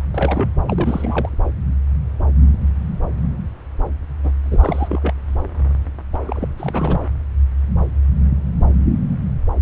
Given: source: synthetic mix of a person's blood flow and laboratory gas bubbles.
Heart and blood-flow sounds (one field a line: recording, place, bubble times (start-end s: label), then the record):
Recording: Doppler ultrasound of blood flow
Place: subclavian vein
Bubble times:
0.14-0.49 s: bubbles
0.68-1.29 s: bubbles
4.23-4.32 s: bubbles
4.44-5.13 s: bubbles
6.13-6.17 s: bubbles
6.25-6.48 s: bubbles
6.58-7.01 s: bubbles
From the record:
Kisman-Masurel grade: 332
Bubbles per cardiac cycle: rolling drumbeat, 9 or more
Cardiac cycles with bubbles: 50 to 99%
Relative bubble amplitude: moderate (0.250 to 0.450)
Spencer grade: 3 (all of the cardiac periods contain showers or single bubble signals, but not dominating or overriding the cardiac motion signals)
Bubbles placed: anywhere in the cardiac cycle